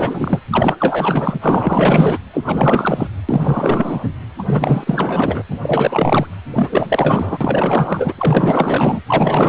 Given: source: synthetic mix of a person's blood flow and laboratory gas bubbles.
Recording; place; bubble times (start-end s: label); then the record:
Doppler ultrasound of blood flow; precordium
0.00-0.39 s: bubbles
0.50-1.38 s: bubbles
1.41-2.18 s: bubbles
2.33-2.42 s: bubbles
2.44-3.07 s: bubbles
3.29-4.04 s: bubbles
4.38-4.43 s: bubbles
4.46-5.42 s: bubbles
5.50-5.59 s: bubbles
5.62-6.27 s: bubbles
6.54-7.38 s: bubbles
7.41-8.14 s: bubbles
8.18-9.01 s: bubbles
9.07-9.49 s: bubbles
From the record:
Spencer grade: 4 (maximum detectable bubble signal sounding continuously throughout systole and diastole of every cardiac period, and overriding the amplitude of the normal cardiac signals); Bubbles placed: anywhere in the cardiac cycle